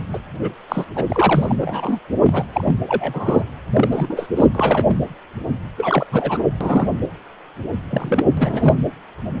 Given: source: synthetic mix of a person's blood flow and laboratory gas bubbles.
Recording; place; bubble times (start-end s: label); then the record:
Doppler ultrasound of blood flow; precordium
0.13-0.19 s: bubbles
0.40-0.51 s: bubbles
0.68-0.86 s: bubbles
0.96-1.04 s: bubbles
1.09-1.55 s: bubbles
1.61-1.99 s: bubbles
2.22-2.46 s: bubbles
2.53-2.75 s: bubbles
2.88-3.44 s: bubbles
3.72-4.27 s: bubbles
4.36-4.46 s: bubbles
4.54-4.99 s: bubbles
5.77-6.07 s: bubbles
6.11-6.42 s: bubbles
6.61-6.98 s: bubbles
7.90-8.26 s: bubbles
8.37-8.75 s: bubbles
From the record:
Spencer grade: 3 (all of the cardiac periods contain showers or single bubble signals, but not dominating or overriding the cardiac motion signals); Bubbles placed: anywhere in the cardiac cycle